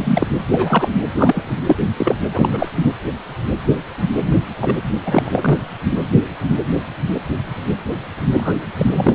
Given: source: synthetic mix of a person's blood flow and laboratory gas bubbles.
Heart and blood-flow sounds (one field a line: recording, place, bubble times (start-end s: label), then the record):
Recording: Doppler ultrasound of blood flow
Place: precordium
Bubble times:
0.03-0.27 s: bubbles
0.52-0.94 s: bubbles
1.16-1.56 s: bubbles
1.67-1.76 s: bubbles
1.97-2.16 s: bubbles
2.32-2.49 s: bubbles
2.52-2.68 s: bubbles
2.75-2.91 s: bubbles
4.60-4.76 s: bubbles
5.04-5.58 s: bubbles
8.33-8.53 s: bubbles
8.78-9.13 s: bubbles
From the record:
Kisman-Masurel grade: 233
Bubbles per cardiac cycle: several, 3 to 8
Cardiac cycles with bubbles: 50 to 99%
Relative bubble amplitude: loud (0.450 to 0.775)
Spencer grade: 3 (all of the cardiac periods contain showers or single bubble signals, but not dominating or overriding the cardiac motion signals)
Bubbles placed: anywhere in the cardiac cycle